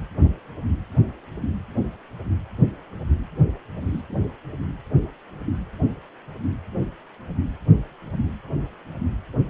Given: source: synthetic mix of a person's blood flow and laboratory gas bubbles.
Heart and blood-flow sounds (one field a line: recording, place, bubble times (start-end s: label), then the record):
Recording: Doppler ultrasound of blood flow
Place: precordium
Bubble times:
3.92-4.01 s: bubbles
4.08-4.17 s: bubbles
From the record:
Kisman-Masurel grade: 111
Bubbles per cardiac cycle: 1 to 2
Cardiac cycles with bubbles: 1 to 10%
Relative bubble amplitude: barely perceptible (0.100 to 0.250)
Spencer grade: 1 (occasional bubble signal discernible with the cardiac motion signal, with majority of cardiac periods free of bubbles)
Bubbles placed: only in the low amplitude regions of the cardiac cycle